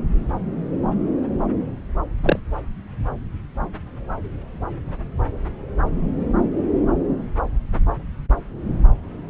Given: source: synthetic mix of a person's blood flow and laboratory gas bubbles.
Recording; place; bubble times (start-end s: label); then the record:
Doppler ultrasound of blood flow; subclavian vein
2.23-2.39 s: bubbles
From the record:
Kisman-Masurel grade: 112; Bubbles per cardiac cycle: 1 to 2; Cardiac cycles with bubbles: 1 to 10%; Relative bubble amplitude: moderate (0.250 to 0.450); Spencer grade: 1 (occasional bubble signal discernible with the cardiac motion signal, with majority of cardiac periods free of bubbles); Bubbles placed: anywhere in the cardiac cycle